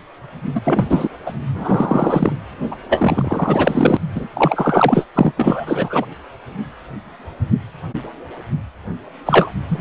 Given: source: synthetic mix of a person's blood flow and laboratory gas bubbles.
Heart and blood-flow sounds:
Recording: Doppler ultrasound of blood flow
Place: precordium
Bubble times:
0.54-0.60 s: bubbles
0.64-0.85 s: bubbles
0.89-1.08 s: bubbles
1.25-1.32 s: bubbles
1.54-2.33 s: bubbles
2.71-2.76 s: bubbles
2.89-3.97 s: bubbles
4.15-4.28 s: bubbles
4.33-5.06 s: bubbles
5.15-5.32 s: bubbles
5.37-6.06 s: bubbles
9.25-9.51 s: bubbles
9.68-9.81 s: bubbles
From the record:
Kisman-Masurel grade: 333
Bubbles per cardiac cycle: rolling drumbeat, 9 or more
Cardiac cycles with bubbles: 50 to 99%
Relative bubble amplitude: loud (0.450 to 0.775)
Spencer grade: 3 (all of the cardiac periods contain showers or single bubble signals, but not dominating or overriding the cardiac motion signals)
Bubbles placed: anywhere in the cardiac cycle

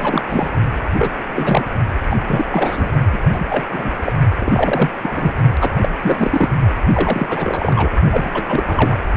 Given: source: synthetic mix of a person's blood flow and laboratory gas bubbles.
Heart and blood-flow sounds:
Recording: Doppler ultrasound of blood flow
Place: precordium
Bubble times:
0.00-0.22 s: bubbles
0.27-0.49 s: bubbles
0.99-1.10 s: bubbles
1.35-1.63 s: bubbles
2.10-2.17 s: bubbles
2.27-2.46 s: bubbles
2.52-2.90 s: bubbles
3.12-3.22 s: bubbles
3.33-3.45 s: bubbles
3.48-3.64 s: bubbles
3.69-3.95 s: bubbles
4.02-4.12 s: bubbles
4.39-4.89 s: bubbles
5.03-5.32 s: bubbles
5.61-5.71 s: bubbles
5.82-5.88 s: bubbles
6.03-6.49 s: bubbles
6.93-7.89 s: bubbles
8.11-8.31 s: bubbles
8.34-8.43 s: bubbles
8.48-8.98 s: bubbles
From the record:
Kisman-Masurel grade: 343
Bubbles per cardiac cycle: rolling drumbeat, 9 or more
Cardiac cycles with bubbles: 100%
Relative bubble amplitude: loud (0.450 to 0.775)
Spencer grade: 3 (all of the cardiac periods contain showers or single bubble signals, but not dominating or overriding the cardiac motion signals)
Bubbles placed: only in the low amplitude regions of the cardiac cycle

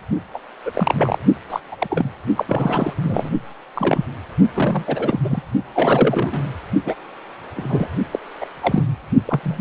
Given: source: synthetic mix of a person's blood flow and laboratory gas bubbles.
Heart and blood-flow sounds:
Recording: Doppler ultrasound of blood flow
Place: precordium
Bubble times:
0.33-0.39 s: bubbles
0.65-1.19 s: bubbles
1.50-1.60 s: bubbles
1.71-1.76 s: bubbles
1.79-1.87 s: bubbles
1.90-2.09 s: bubbles
2.37-2.94 s: bubbles
3.03-3.31 s: bubbles
3.75-4.05 s: bubbles
4.53-5.20 s: bubbles
5.24-5.42 s: bubbles
5.74-6.43 s: bubbles
6.84-6.95 s: bubbles
7.55-7.88 s: bubbles
8.11-8.19 s: bubbles
8.40-8.46 s: bubbles
8.62-8.83 s: bubbles
9.26-9.40 s: bubbles
9.43-9.61 s: bubbles
From the record:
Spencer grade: 3 (all of the cardiac periods contain showers or single bubble signals, but not dominating or overriding the cardiac motion signals)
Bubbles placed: only in the low amplitude regions of the cardiac cycle

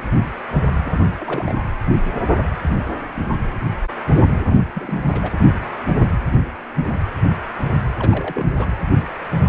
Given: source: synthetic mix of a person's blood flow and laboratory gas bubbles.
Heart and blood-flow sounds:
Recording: Doppler ultrasound of blood flow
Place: precordium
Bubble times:
0.84-1.01 s: bubbles
1.20-1.63 s: bubbles
4.47-4.58 s: bubbles
4.75-5.30 s: bubbles
7.99-8.46 s: bubbles
8.59-8.66 s: bubbles
From the record:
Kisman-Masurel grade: 221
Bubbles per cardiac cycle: several, 3 to 8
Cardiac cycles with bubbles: 10 to 50%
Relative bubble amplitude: barely perceptible (0.100 to 0.250)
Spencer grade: 2 (many but less than half of the cardiac periods contain bubble signals, singularly or in groups)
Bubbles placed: anywhere in the cardiac cycle

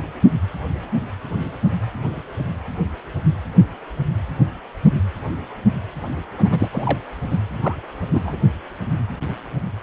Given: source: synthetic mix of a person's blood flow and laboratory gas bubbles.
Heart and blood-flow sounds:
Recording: Doppler ultrasound of blood flow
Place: precordium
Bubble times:
6.38-6.69 s: bubbles
6.72-6.99 s: bubbles
7.30-7.39 s: bubbles
7.43-7.79 s: bubbles
8.12-8.36 s: bubbles
From the record:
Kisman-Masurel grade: 222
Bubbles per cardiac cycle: several, 3 to 8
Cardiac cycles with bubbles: 10 to 50%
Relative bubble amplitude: moderate (0.250 to 0.450)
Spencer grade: 2 (many but less than half of the cardiac periods contain bubble signals, singularly or in groups)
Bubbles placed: anywhere in the cardiac cycle

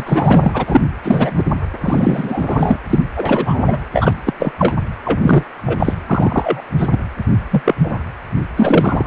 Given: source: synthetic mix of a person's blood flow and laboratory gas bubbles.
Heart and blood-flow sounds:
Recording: Doppler ultrasound of blood flow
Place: precordium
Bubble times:
0.00-0.04 s: bubbles
0.06-0.81 s: bubbles
1.03-1.44 s: bubbles
1.81-2.78 s: bubbles
2.90-3.00 s: bubbles
3.16-3.79 s: bubbles
3.94-4.13 s: bubbles
4.25-4.33 s: bubbles
4.40-4.52 s: bubbles
4.58-4.74 s: bubbles
5.04-5.44 s: bubbles
5.66-5.94 s: bubbles
6.07-6.62 s: bubbles
6.78-6.88 s: bubbles
6.91-6.99 s: bubbles
7.50-7.63 s: bubbles
7.65-7.74 s: bubbles
7.83-7.97 s: bubbles
8.56-9.07 s: bubbles
From the record:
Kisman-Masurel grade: 243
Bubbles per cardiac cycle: several, 3 to 8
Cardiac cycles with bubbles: 100%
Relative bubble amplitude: loud (0.450 to 0.775)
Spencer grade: 3 (all of the cardiac periods contain showers or single bubble signals, but not dominating or overriding the cardiac motion signals)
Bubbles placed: anywhere in the cardiac cycle

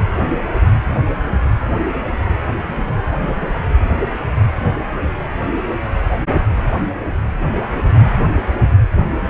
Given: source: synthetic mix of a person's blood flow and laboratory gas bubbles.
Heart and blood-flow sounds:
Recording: Doppler ultrasound of blood flow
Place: precordium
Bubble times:
no bubbles
From the record:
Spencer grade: 0 (complete lack of bubble signals)

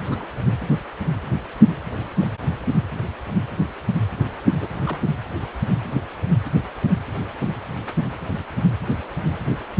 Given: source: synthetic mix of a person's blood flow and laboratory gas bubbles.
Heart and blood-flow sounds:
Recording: Doppler ultrasound of blood flow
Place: precordium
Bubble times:
0.11-0.26 s: bubbles
2.21-2.26 s: bubbles
4.60-4.68 s: bubbles
4.86-4.98 s: bubbles
From the record:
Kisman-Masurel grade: 121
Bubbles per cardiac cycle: 1 to 2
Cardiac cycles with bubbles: 10 to 50%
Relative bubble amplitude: barely perceptible (0.100 to 0.250)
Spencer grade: 2 (many but less than half of the cardiac periods contain bubble signals, singularly or in groups)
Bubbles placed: only in the low amplitude regions of the cardiac cycle

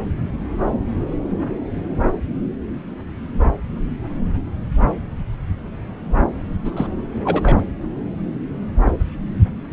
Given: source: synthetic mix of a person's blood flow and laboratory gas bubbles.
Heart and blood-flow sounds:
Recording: Doppler ultrasound of blood flow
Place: subclavian vein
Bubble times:
6.65-6.71 s: bubbles
6.76-6.87 s: bubbles
7.25-7.61 s: bubbles
From the record:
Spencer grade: 1 (occasional bubble signal discernible with the cardiac motion signal, with majority of cardiac periods free of bubbles)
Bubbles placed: anywhere in the cardiac cycle

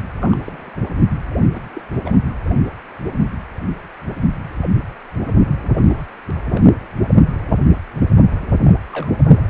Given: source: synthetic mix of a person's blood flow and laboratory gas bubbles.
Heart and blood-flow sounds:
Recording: Doppler ultrasound of blood flow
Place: precordium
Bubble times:
0.21-0.37 s: bubbles
0.46-0.81 s: bubbles
1.54-1.59 s: bubbles
1.74-1.82 s: bubbles
2.05-2.19 s: bubbles
5.75-6.03 s: bubbles
6.50-6.70 s: bubbles
8.64-8.77 s: bubbles
8.92-9.12 s: bubbles
9.32-9.36 s: bubbles
From the record:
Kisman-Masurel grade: 221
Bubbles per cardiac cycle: several, 3 to 8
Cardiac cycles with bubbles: 10 to 50%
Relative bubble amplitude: barely perceptible (0.100 to 0.250)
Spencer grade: 2 (many but less than half of the cardiac periods contain bubble signals, singularly or in groups)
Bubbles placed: anywhere in the cardiac cycle

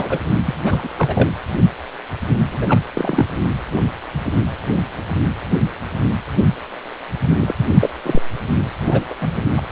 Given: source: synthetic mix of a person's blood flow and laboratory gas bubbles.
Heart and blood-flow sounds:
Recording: Doppler ultrasound of blood flow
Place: precordium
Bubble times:
0.00-0.18 s: bubbles
0.45-0.54 s: bubbles
0.64-0.88 s: bubbles
0.96-1.30 s: bubbles
2.51-2.81 s: bubbles
2.95-3.27 s: bubbles
7.41-7.54 s: bubbles
7.79-7.90 s: bubbles
8.03-8.21 s: bubbles
8.88-9.04 s: bubbles
9.10-9.15 s: bubbles
9.21-9.29 s: bubbles
9.55-9.60 s: bubbles
From the record:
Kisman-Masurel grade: 222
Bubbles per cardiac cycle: several, 3 to 8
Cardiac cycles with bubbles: 10 to 50%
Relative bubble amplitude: moderate (0.250 to 0.450)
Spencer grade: 2 (many but less than half of the cardiac periods contain bubble signals, singularly or in groups)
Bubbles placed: anywhere in the cardiac cycle

